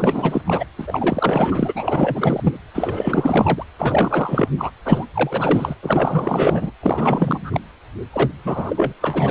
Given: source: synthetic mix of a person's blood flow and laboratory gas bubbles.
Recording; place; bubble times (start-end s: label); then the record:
Doppler ultrasound of blood flow; precordium
0.00-0.41 s: bubbles
0.46-0.65 s: bubbles
0.78-2.56 s: bubbles
2.73-3.64 s: bubbles
3.78-4.48 s: bubbles
4.57-4.72 s: bubbles
4.84-5.05 s: bubbles
5.13-5.75 s: bubbles
5.82-6.71 s: bubbles
6.82-7.61 s: bubbles
8.12-8.31 s: bubbles
8.44-8.94 s: bubbles
9.00-9.31 s: bubbles
From the record:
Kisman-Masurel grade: 444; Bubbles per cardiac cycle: continuous sound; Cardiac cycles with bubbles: 100%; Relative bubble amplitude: maximal (0.775 to 0.999); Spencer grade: 4 (maximum detectable bubble signal sounding continuously throughout systole and diastole of every cardiac period, and overriding the amplitude of the normal cardiac signals); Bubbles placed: anywhere in the cardiac cycle